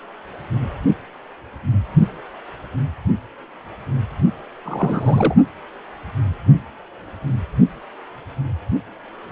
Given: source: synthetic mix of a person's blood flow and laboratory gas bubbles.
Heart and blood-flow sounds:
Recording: Doppler ultrasound of blood flow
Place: precordium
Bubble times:
4.64-5.35 s: bubbles
From the record:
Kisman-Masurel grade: 213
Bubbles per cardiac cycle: several, 3 to 8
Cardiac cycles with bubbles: 1 to 10%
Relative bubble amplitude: loud (0.450 to 0.775)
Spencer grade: 1 (occasional bubble signal discernible with the cardiac motion signal, with majority of cardiac periods free of bubbles)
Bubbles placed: only in the low amplitude regions of the cardiac cycle

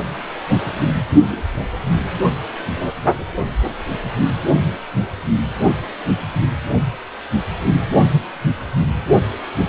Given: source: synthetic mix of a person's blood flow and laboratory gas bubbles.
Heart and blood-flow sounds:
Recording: Doppler ultrasound of blood flow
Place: precordium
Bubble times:
no bubbles
From the record:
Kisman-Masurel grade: 000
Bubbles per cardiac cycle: 0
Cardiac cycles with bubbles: 0%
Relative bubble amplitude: no bubbles discernible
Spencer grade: 0 (complete lack of bubble signals)

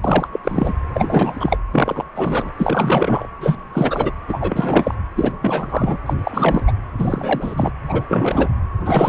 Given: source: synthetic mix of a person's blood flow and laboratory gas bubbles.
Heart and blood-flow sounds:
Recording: Doppler ultrasound of blood flow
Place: precordium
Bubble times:
0.04-0.28 s: bubbles
0.32-0.40 s: bubbles
0.44-0.74 s: bubbles
0.93-1.58 s: bubbles
1.73-2.04 s: bubbles
2.15-2.52 s: bubbles
2.58-3.27 s: bubbles
3.40-3.56 s: bubbles
3.73-4.12 s: bubbles
4.29-4.95 s: bubbles
5.15-5.32 s: bubbles
5.41-5.97 s: bubbles
6.05-6.13 s: bubbles
6.24-6.72 s: bubbles
6.98-7.71 s: bubbles
7.88-8.02 s: bubbles
8.08-8.48 s: bubbles
8.85-9.09 s: bubbles
From the record:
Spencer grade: 3 (all of the cardiac periods contain showers or single bubble signals, but not dominating or overriding the cardiac motion signals)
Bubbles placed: anywhere in the cardiac cycle

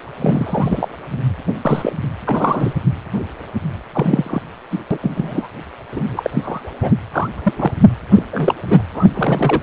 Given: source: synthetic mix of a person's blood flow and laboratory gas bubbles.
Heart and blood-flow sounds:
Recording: Doppler ultrasound of blood flow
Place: precordium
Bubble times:
0.21-0.89 s: bubbles
1.65-1.93 s: bubbles
2.25-2.73 s: bubbles
3.93-4.42 s: bubbles
4.71-4.79 s: bubbles
4.91-4.98 s: bubbles
5.03-5.48 s: bubbles
5.92-6.62 s: bubbles
6.81-6.92 s: bubbles
7.13-7.29 s: bubbles
7.38-7.41 s: bubbles
7.44-7.54 s: bubbles
7.58-7.71 s: bubbles
8.12-8.24 s: bubbles
8.33-8.54 s: bubbles
8.62-8.82 s: bubbles
8.94-9.04 s: bubbles
9.14-9.62 s: bubbles
From the record:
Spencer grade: 3 (all of the cardiac periods contain showers or single bubble signals, but not dominating or overriding the cardiac motion signals)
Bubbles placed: anywhere in the cardiac cycle

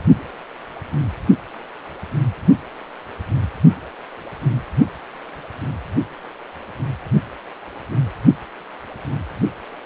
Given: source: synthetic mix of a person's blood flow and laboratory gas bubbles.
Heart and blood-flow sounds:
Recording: Doppler ultrasound of blood flow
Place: precordium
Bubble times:
no bubbles
From the record:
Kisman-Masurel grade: 000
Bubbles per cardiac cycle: 0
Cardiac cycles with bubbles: 0%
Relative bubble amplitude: no bubbles discernible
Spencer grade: 0 (complete lack of bubble signals)

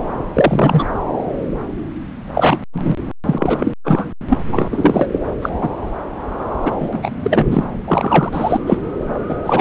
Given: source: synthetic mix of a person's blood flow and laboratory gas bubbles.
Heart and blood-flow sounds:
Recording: Doppler ultrasound of blood flow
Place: subclavian vein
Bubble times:
0.33-0.84 s: bubbles
2.35-2.58 s: bubbles
2.73-2.96 s: bubbles
3.25-3.71 s: bubbles
3.85-4.08 s: bubbles
4.30-4.38 s: bubbles
4.52-5.08 s: bubbles
5.11-5.19 s: bubbles
5.41-5.49 s: bubbles
5.61-5.69 s: bubbles
6.61-6.71 s: bubbles
6.80-6.88 s: bubbles
6.93-6.99 s: bubbles
7.02-7.11 s: bubbles
7.23-7.47 s: bubbles
7.50-7.64 s: bubbles
7.87-8.61 s: bubbles
8.66-8.78 s: bubbles
9.29-9.36 s: bubbles
9.46-9.61 s: bubbles
From the record:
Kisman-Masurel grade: 233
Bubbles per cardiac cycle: several, 3 to 8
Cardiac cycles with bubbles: 50 to 99%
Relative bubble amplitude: loud (0.450 to 0.775)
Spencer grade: 3 (all of the cardiac periods contain showers or single bubble signals, but not dominating or overriding the cardiac motion signals)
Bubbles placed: anywhere in the cardiac cycle

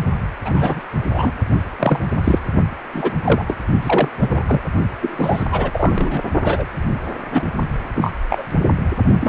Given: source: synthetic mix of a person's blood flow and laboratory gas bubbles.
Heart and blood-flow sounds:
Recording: Doppler ultrasound of blood flow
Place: precordium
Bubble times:
0.45-0.80 s: bubbles
1.12-1.31 s: bubbles
1.79-2.00 s: bubbles
2.24-2.39 s: bubbles
2.92-3.11 s: bubbles
3.24-3.45 s: bubbles
3.48-3.56 s: bubbles
3.81-4.08 s: bubbles
4.20-4.43 s: bubbles
4.47-4.61 s: bubbles
5.02-5.45 s: bubbles
5.51-6.22 s: bubbles
6.41-6.66 s: bubbles
7.31-7.50 s: bubbles
7.95-8.13 s: bubbles
8.29-8.46 s: bubbles
9.21-9.29 s: bubbles
From the record:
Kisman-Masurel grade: 243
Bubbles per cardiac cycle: several, 3 to 8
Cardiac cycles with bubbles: 100%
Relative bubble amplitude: loud (0.450 to 0.775)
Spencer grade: 3 (all of the cardiac periods contain showers or single bubble signals, but not dominating or overriding the cardiac motion signals)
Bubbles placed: only in the low amplitude regions of the cardiac cycle

